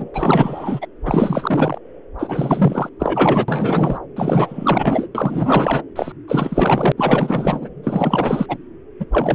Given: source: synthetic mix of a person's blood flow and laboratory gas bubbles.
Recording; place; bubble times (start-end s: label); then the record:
Doppler ultrasound of blood flow; subclavian vein
0.00-0.10 s: bubbles
0.14-0.86 s: bubbles
1.05-1.78 s: bubbles
2.19-2.90 s: bubbles
2.99-3.98 s: bubbles
4.16-5.08 s: bubbles
5.15-5.82 s: bubbles
5.96-6.12 s: bubbles
6.28-6.92 s: bubbles
6.97-7.69 s: bubbles
7.83-8.58 s: bubbles
9.00-9.05 s: bubbles
9.12-9.34 s: bubbles
From the record:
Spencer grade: 4 (maximum detectable bubble signal sounding continuously throughout systole and diastole of every cardiac period, and overriding the amplitude of the normal cardiac signals); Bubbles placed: anywhere in the cardiac cycle